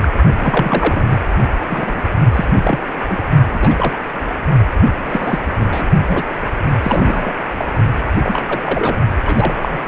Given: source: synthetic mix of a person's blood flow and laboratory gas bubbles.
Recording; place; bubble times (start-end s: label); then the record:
Doppler ultrasound of blood flow; precordium
0.02-0.10 s: bubbles
0.40-1.17 s: bubbles
1.69-2.02 s: bubbles
2.33-2.79 s: bubbles
3.08-3.23 s: bubbles
3.54-3.96 s: bubbles
5.04-5.39 s: bubbles
5.55-5.87 s: bubbles
6.08-6.25 s: bubbles
6.83-7.34 s: bubbles
7.57-7.65 s: bubbles
8.23-8.60 s: bubbles
8.65-8.96 s: bubbles
9.25-9.88 s: bubbles
From the record:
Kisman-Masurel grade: 242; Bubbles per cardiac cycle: several, 3 to 8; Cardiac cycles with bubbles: 100%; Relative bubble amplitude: moderate (0.250 to 0.450); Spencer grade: 3 (all of the cardiac periods contain showers or single bubble signals, but not dominating or overriding the cardiac motion signals); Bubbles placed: only in the low amplitude regions of the cardiac cycle